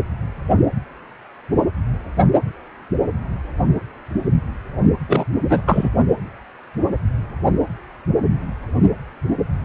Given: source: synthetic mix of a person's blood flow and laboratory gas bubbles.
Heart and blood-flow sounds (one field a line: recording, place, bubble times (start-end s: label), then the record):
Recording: Doppler ultrasound of blood flow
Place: precordium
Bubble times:
5.08-5.25 s: bubbles
5.49-5.61 s: bubbles
5.67-5.90 s: bubbles
From the record:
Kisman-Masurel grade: 223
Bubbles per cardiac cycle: several, 3 to 8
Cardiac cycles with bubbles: 10 to 50%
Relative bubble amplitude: loud (0.450 to 0.775)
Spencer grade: 2 (many but less than half of the cardiac periods contain bubble signals, singularly or in groups)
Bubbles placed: only in the low amplitude regions of the cardiac cycle